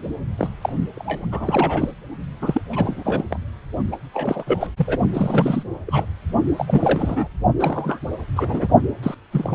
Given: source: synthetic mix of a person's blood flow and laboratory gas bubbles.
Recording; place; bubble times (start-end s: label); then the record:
Doppler ultrasound of blood flow; precordium
0.00-0.08 s: bubbles
0.37-0.47 s: bubbles
0.61-0.72 s: bubbles
0.96-1.26 s: bubbles
1.31-1.91 s: bubbles
2.42-2.61 s: bubbles
2.71-3.25 s: bubbles
3.30-3.39 s: bubbles
3.92-3.96 s: bubbles
4.14-4.43 s: bubbles
4.46-4.67 s: bubbles
4.77-4.99 s: bubbles
5.13-5.63 s: bubbles
5.87-6.05 s: bubbles
6.58-7.28 s: bubbles
7.59-7.98 s: bubbles
8.36-8.68 s: bubbles
9.03-9.14 s: bubbles
9.32-9.54 s: bubbles
From the record:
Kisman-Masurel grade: 342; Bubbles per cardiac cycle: rolling drumbeat, 9 or more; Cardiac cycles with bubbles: 100%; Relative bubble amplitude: moderate (0.250 to 0.450); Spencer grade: 3 (all of the cardiac periods contain showers or single bubble signals, but not dominating or overriding the cardiac motion signals); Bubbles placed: only in the low amplitude regions of the cardiac cycle